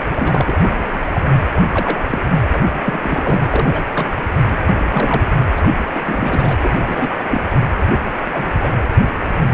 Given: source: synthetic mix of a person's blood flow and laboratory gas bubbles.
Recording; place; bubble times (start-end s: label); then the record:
Doppler ultrasound of blood flow; precordium
0.11-0.43 s: bubbles
0.46-0.57 s: bubbles
0.60-0.71 s: bubbles
0.93-0.98 s: bubbles
1.06-1.21 s: bubbles
1.74-2.00 s: bubbles
2.10-2.19 s: bubbles
2.30-2.40 s: bubbles
2.51-2.61 s: bubbles
2.71-2.76 s: bubbles
2.85-3.42 s: bubbles
3.48-3.82 s: bubbles
3.94-4.11 s: bubbles
4.46-4.58 s: bubbles
4.77-5.34 s: bubbles
5.56-5.67 s: bubbles
5.95-6.00 s: bubbles
6.04-6.56 s: bubbles
6.62-6.70 s: bubbles
6.73-7.14 s: bubbles
7.30-7.52 s: bubbles
7.90-8.04 s: bubbles
8.33-8.47 s: bubbles
8.61-8.71 s: bubbles
From the record:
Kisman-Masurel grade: 242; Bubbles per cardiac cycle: several, 3 to 8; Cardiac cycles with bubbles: 100%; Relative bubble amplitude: moderate (0.250 to 0.450); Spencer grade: 3 (all of the cardiac periods contain showers or single bubble signals, but not dominating or overriding the cardiac motion signals); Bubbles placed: anywhere in the cardiac cycle